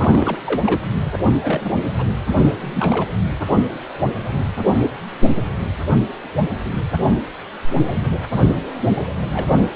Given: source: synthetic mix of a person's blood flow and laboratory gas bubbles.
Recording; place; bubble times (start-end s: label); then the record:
Doppler ultrasound of blood flow; precordium
0.00-0.38 s: bubbles
0.45-0.81 s: bubbles
1.04-1.19 s: bubbles
1.41-1.80 s: bubbles
1.97-2.05 s: bubbles
2.38-2.53 s: bubbles
2.61-3.12 s: bubbles
9.30-9.67 s: bubbles
From the record:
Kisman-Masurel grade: 222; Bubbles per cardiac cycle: several, 3 to 8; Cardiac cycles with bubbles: 10 to 50%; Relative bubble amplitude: moderate (0.250 to 0.450); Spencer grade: 2 (many but less than half of the cardiac periods contain bubble signals, singularly or in groups); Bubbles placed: anywhere in the cardiac cycle